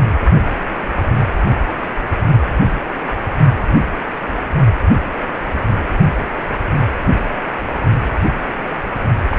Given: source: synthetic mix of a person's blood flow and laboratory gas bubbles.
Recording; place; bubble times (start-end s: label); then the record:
Doppler ultrasound of blood flow; precordium
9.31-9.39 s: bubbles
From the record:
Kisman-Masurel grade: 211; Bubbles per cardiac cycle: several, 3 to 8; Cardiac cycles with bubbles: 1 to 10%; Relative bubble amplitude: barely perceptible (0.100 to 0.250); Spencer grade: 1 (occasional bubble signal discernible with the cardiac motion signal, with majority of cardiac periods free of bubbles); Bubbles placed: only in the low amplitude regions of the cardiac cycle